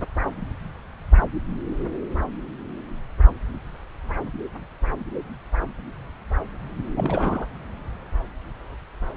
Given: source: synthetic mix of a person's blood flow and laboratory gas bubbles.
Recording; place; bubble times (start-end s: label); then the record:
Doppler ultrasound of blood flow; subclavian vein
6.92-7.46 s: bubbles
From the record:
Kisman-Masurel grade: 212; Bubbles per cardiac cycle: several, 3 to 8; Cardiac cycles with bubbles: 1 to 10%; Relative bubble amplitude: moderate (0.250 to 0.450); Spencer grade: 1 (occasional bubble signal discernible with the cardiac motion signal, with majority of cardiac periods free of bubbles); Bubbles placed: anywhere in the cardiac cycle